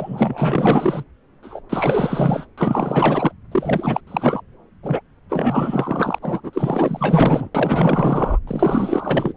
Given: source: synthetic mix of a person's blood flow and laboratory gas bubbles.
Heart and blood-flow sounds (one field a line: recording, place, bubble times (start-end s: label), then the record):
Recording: Doppler ultrasound of blood flow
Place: subclavian vein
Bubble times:
0.00-1.04 s: bubbles
1.42-1.60 s: bubbles
1.69-2.46 s: bubbles
2.57-3.33 s: bubbles
3.52-4.01 s: bubbles
4.07-4.41 s: bubbles
4.83-5.02 s: bubbles
5.29-6.19 s: bubbles
6.22-6.41 s: bubbles
6.44-7.49 s: bubbles
7.54-8.39 s: bubbles
8.47-9.34 s: bubbles
From the record:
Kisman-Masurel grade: 444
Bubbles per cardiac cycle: continuous sound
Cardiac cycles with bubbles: 100%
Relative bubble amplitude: maximal (0.775 to 0.999)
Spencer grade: 4 (maximum detectable bubble signal sounding continuously throughout systole and diastole of every cardiac period, and overriding the amplitude of the normal cardiac signals)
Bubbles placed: anywhere in the cardiac cycle